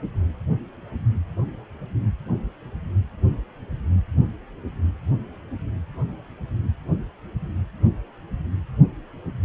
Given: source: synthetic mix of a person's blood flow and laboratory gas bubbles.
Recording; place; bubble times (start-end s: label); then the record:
Doppler ultrasound of blood flow; precordium
no bubbles
From the record:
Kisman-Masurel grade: 000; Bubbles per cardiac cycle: 0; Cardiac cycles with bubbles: 0%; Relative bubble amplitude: no bubbles discernible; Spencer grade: 0 (complete lack of bubble signals)